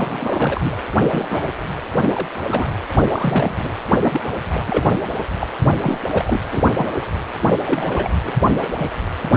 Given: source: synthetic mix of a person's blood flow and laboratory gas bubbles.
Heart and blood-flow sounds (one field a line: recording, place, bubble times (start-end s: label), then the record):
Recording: Doppler ultrasound of blood flow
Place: precordium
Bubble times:
0.00-0.77 s: bubbles
1.07-1.52 s: bubbles
1.95-2.10 s: bubbles
2.13-2.27 s: bubbles
2.50-2.67 s: bubbles
3.11-3.73 s: bubbles
4.01-4.21 s: bubbles
4.45-4.86 s: bubbles
5.39-5.47 s: bubbles
5.83-5.98 s: bubbles
6.13-6.40 s: bubbles
6.52-6.63 s: bubbles
6.74-7.03 s: bubbles
7.41-8.10 s: bubbles
8.24-8.33 s: bubbles
8.40-8.68 s: bubbles
8.78-8.89 s: bubbles
9.33-9.37 s: bubbles
From the record:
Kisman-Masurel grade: 242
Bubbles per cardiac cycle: several, 3 to 8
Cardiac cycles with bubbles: 100%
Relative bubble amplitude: moderate (0.250 to 0.450)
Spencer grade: 3 (all of the cardiac periods contain showers or single bubble signals, but not dominating or overriding the cardiac motion signals)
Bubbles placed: anywhere in the cardiac cycle